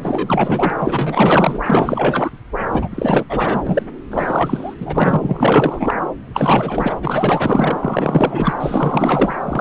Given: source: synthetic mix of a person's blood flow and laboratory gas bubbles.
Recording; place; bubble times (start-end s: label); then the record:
Doppler ultrasound of blood flow; subclavian vein
0.01-0.70 s: bubbles
0.79-1.59 s: bubbles
1.66-2.30 s: bubbles
2.71-3.24 s: bubbles
3.29-3.83 s: bubbles
4.10-4.74 s: bubbles
4.80-5.19 s: bubbles
5.21-5.94 s: bubbles
6.33-6.95 s: bubbles
7.00-7.77 s: bubbles
7.80-8.53 s: bubbles
8.60-9.34 s: bubbles
9.48-9.61 s: bubbles
From the record:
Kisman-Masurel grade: 444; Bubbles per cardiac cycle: continuous sound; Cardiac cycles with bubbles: 100%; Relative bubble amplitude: maximal (0.775 to 0.999); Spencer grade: 4 (maximum detectable bubble signal sounding continuously throughout systole and diastole of every cardiac period, and overriding the amplitude of the normal cardiac signals); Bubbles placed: anywhere in the cardiac cycle